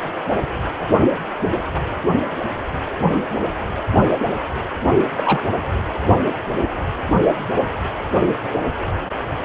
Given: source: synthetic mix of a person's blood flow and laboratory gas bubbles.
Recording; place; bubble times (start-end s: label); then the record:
Doppler ultrasound of blood flow; precordium
5.16-5.44 s: bubbles
From the record:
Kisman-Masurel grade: 112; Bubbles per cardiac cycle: 1 to 2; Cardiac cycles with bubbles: 1 to 10%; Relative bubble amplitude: moderate (0.250 to 0.450); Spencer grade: 1 (occasional bubble signal discernible with the cardiac motion signal, with majority of cardiac periods free of bubbles); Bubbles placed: only in the low amplitude regions of the cardiac cycle